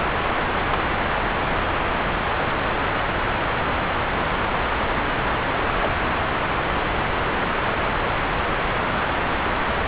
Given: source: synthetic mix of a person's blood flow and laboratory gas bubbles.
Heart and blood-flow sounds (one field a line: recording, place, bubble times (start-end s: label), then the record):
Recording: Doppler ultrasound of blood flow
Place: subclavian vein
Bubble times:
0.37-0.42 s: bubbles
0.72-0.77 s: bubbles
5.67-5.74 s: bubbles
5.80-5.92 s: bubbles
From the record:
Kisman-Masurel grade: 121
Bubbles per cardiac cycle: 1 to 2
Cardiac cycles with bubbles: 10 to 50%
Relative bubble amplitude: barely perceptible (0.100 to 0.250)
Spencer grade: 2 (many but less than half of the cardiac periods contain bubble signals, singularly or in groups)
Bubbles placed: anywhere in the cardiac cycle